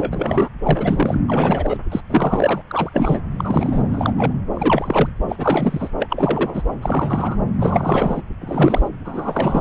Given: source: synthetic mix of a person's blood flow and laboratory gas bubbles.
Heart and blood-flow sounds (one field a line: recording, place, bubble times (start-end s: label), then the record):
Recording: Doppler ultrasound of blood flow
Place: subclavian vein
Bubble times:
0.00-0.49 s: bubbles
0.63-1.21 s: bubbles
1.27-1.77 s: bubbles
1.92-2.00 s: bubbles
2.10-2.62 s: bubbles
2.67-2.90 s: bubbles
2.93-3.21 s: bubbles
3.38-3.82 s: bubbles
3.90-4.33 s: bubbles
4.53-5.09 s: bubbles
5.28-5.90 s: bubbles
5.99-6.63 s: bubbles
6.82-7.38 s: bubbles
7.58-8.22 s: bubbles
8.41-8.88 s: bubbles
9.04-9.61 s: bubbles
From the record:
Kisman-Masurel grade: 343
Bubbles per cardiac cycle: rolling drumbeat, 9 or more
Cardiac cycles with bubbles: 100%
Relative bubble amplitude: loud (0.450 to 0.775)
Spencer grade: 3 (all of the cardiac periods contain showers or single bubble signals, but not dominating or overriding the cardiac motion signals)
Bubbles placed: anywhere in the cardiac cycle